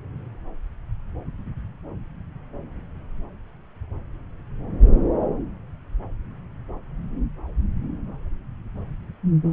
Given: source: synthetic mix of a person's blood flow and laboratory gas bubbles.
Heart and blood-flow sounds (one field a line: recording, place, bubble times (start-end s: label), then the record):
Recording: Doppler ultrasound of blood flow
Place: subclavian vein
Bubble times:
no bubbles
From the record:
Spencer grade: 0 (complete lack of bubble signals)